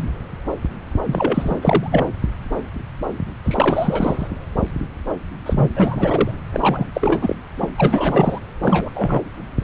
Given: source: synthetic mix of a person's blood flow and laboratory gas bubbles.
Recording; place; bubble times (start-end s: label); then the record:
Doppler ultrasound of blood flow; subclavian vein
1.06-2.06 s: bubbles
3.44-4.28 s: bubbles
5.46-5.69 s: bubbles
5.72-6.31 s: bubbles
6.52-6.87 s: bubbles
6.94-7.35 s: bubbles
7.56-7.69 s: bubbles
7.77-8.38 s: bubbles
8.62-8.89 s: bubbles
8.95-9.21 s: bubbles
From the record:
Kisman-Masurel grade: 332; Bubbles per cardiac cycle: rolling drumbeat, 9 or more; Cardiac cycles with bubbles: 50 to 99%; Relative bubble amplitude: moderate (0.250 to 0.450); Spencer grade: 3 (all of the cardiac periods contain showers or single bubble signals, but not dominating or overriding the cardiac motion signals); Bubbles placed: anywhere in the cardiac cycle